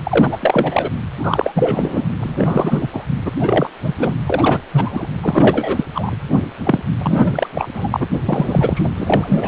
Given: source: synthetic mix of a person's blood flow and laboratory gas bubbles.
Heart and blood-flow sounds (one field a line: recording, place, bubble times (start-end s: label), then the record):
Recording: Doppler ultrasound of blood flow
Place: precordium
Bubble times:
0.03-0.38 s: bubbles
0.41-0.89 s: bubbles
1.19-2.06 s: bubbles
2.19-2.89 s: bubbles
2.93-3.04 s: bubbles
3.25-3.31 s: bubbles
3.40-3.69 s: bubbles
3.83-3.94 s: bubbles
3.98-4.15 s: bubbles
4.26-4.62 s: bubbles
4.73-5.07 s: bubbles
5.22-5.84 s: bubbles
5.95-6.13 s: bubbles
6.64-6.83 s: bubbles
7.00-7.47 s: bubbles
7.54-7.69 s: bubbles
7.74-8.07 s: bubbles
8.28-8.89 s: bubbles
8.96-9.48 s: bubbles
From the record:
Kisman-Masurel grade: 343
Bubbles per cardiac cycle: rolling drumbeat, 9 or more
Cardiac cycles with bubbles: 100%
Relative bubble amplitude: loud (0.450 to 0.775)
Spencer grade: 3 (all of the cardiac periods contain showers or single bubble signals, but not dominating or overriding the cardiac motion signals)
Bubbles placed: anywhere in the cardiac cycle